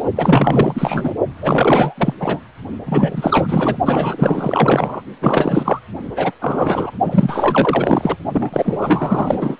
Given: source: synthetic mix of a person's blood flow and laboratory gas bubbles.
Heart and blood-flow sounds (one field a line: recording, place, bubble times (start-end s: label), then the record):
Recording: Doppler ultrasound of blood flow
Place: precordium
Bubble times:
0.00-0.04 s: bubbles
0.15-1.12 s: bubbles
1.40-1.95 s: bubbles
1.98-2.14 s: bubbles
2.20-2.40 s: bubbles
2.86-3.77 s: bubbles
3.86-5.02 s: bubbles
5.21-5.79 s: bubbles
6.16-6.32 s: bubbles
6.41-6.91 s: bubbles
7.07-8.17 s: bubbles
8.33-9.56 s: bubbles
From the record:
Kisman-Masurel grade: 444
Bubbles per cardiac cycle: continuous sound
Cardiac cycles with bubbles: 100%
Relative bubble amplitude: maximal (0.775 to 0.999)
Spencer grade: 4 (maximum detectable bubble signal sounding continuously throughout systole and diastole of every cardiac period, and overriding the amplitude of the normal cardiac signals)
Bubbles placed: only in the low amplitude regions of the cardiac cycle